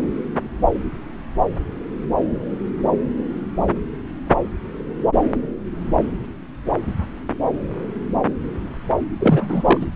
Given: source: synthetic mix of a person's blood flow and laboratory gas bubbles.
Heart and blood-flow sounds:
Doppler ultrasound of blood flow; subclavian vein
9.19-9.78 s: bubbles
9.81-9.87 s: bubbles
From the record:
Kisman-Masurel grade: 213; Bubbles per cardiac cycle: several, 3 to 8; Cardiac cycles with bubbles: 1 to 10%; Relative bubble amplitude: loud (0.450 to 0.775); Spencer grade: 1 (occasional bubble signal discernible with the cardiac motion signal, with majority of cardiac periods free of bubbles); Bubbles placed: anywhere in the cardiac cycle

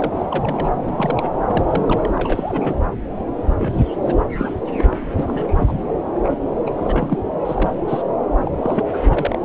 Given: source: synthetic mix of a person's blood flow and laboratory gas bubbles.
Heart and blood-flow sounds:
Doppler ultrasound of blood flow; subclavian vein
0.00-0.26 s: bubbles
0.30-0.71 s: bubbles
0.80-1.31 s: bubbles
1.47-1.64 s: bubbles
1.67-2.10 s: bubbles
2.14-2.77 s: bubbles
3.58-3.81 s: bubbles
4.04-4.22 s: bubbles
4.38-4.52 s: bubbles
4.77-4.96 s: bubbles
5.15-5.74 s: bubbles
6.23-6.59 s: bubbles
6.66-6.72 s: bubbles
6.76-7.19 s: bubbles
7.45-8.03 s: bubbles
8.46-8.52 s: bubbles
8.57-8.85 s: bubbles
8.93-8.97 s: bubbles
9.02-9.38 s: bubbles
From the record:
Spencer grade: 3 (all of the cardiac periods contain showers or single bubble signals, but not dominating or overriding the cardiac motion signals); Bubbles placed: anywhere in the cardiac cycle

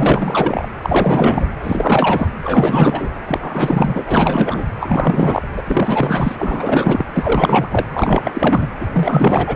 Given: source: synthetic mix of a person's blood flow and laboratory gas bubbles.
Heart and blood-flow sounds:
Doppler ultrasound of blood flow; precordium
0.00-0.67 s: bubbles
0.82-1.46 s: bubbles
1.63-2.27 s: bubbles
2.44-3.09 s: bubbles
3.27-4.02 s: bubbles
4.06-4.70 s: bubbles
4.80-5.42 s: bubbles
5.56-5.62 s: bubbles
5.64-6.38 s: bubbles
6.40-7.05 s: bubbles
7.13-7.68 s: bubbles
7.71-7.85 s: bubbles
7.93-8.67 s: bubbles
8.80-8.87 s: bubbles
8.92-9.56 s: bubbles
From the record:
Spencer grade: 4 (maximum detectable bubble signal sounding continuously throughout systole and diastole of every cardiac period, and overriding the amplitude of the normal cardiac signals); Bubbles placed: anywhere in the cardiac cycle

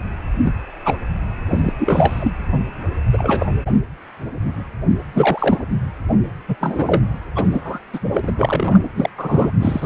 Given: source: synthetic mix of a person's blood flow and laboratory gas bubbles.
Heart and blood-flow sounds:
Doppler ultrasound of blood flow; precordium
0.44-0.52 s: bubbles
0.84-0.97 s: bubbles
1.48-1.72 s: bubbles
1.79-2.33 s: bubbles
3.12-3.46 s: bubbles
5.15-5.66 s: bubbles
6.48-6.55 s: bubbles
6.61-7.02 s: bubbles
7.35-7.48 s: bubbles
7.51-7.79 s: bubbles
7.93-7.99 s: bubbles
8.11-8.19 s: bubbles
8.22-8.31 s: bubbles
8.36-8.79 s: bubbles
8.96-9.09 s: bubbles
9.17-9.50 s: bubbles
9.60-9.86 s: bubbles
From the record:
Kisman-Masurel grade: 232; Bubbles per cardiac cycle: several, 3 to 8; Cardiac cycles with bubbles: 50 to 99%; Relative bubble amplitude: moderate (0.250 to 0.450); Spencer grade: 3 (all of the cardiac periods contain showers or single bubble signals, but not dominating or overriding the cardiac motion signals); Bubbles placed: anywhere in the cardiac cycle

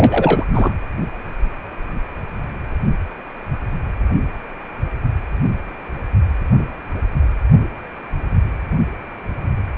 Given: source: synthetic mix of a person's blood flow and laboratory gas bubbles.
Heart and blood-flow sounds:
Doppler ultrasound of blood flow; precordium
0.00-0.44 s: bubbles
0.54-0.71 s: bubbles
From the record:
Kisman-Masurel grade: 213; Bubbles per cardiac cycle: several, 3 to 8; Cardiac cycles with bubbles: 1 to 10%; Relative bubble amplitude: loud (0.450 to 0.775); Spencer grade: 1 (occasional bubble signal discernible with the cardiac motion signal, with majority of cardiac periods free of bubbles); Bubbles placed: anywhere in the cardiac cycle

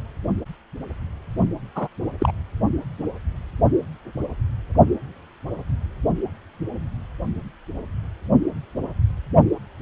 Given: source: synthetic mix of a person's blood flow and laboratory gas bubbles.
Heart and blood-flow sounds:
Doppler ultrasound of blood flow; precordium
1.75-1.88 s: bubbles
2.19-2.31 s: bubbles
From the record:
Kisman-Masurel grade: 212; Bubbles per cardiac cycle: several, 3 to 8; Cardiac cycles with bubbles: 1 to 10%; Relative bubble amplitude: moderate (0.250 to 0.450); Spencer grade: 1 (occasional bubble signal discernible with the cardiac motion signal, with majority of cardiac periods free of bubbles); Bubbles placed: only in the low amplitude regions of the cardiac cycle

